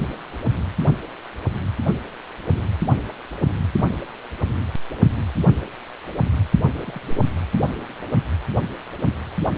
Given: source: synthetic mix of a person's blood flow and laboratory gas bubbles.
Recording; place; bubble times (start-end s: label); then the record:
Doppler ultrasound of blood flow; precordium
6.85-7.21 s: bubbles
From the record:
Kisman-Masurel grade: 121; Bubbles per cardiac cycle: 1 to 2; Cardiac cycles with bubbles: 10 to 50%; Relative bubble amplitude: barely perceptible (0.100 to 0.250); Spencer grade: 2 (many but less than half of the cardiac periods contain bubble signals, singularly or in groups); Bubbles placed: anywhere in the cardiac cycle